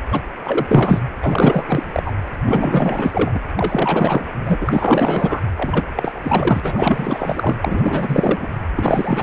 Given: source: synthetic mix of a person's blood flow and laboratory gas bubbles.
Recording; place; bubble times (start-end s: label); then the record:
Doppler ultrasound of blood flow; precordium
0.11-0.22 s: bubbles
0.44-1.00 s: bubbles
1.19-1.65 s: bubbles
1.67-2.13 s: bubbles
2.45-3.40 s: bubbles
3.56-4.28 s: bubbles
4.46-5.41 s: bubbles
5.55-5.86 s: bubbles
5.95-6.60 s: bubbles
6.62-7.55 s: bubbles
7.62-8.48 s: bubbles
8.76-9.23 s: bubbles
From the record:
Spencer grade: 4 (maximum detectable bubble signal sounding continuously throughout systole and diastole of every cardiac period, and overriding the amplitude of the normal cardiac signals); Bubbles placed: anywhere in the cardiac cycle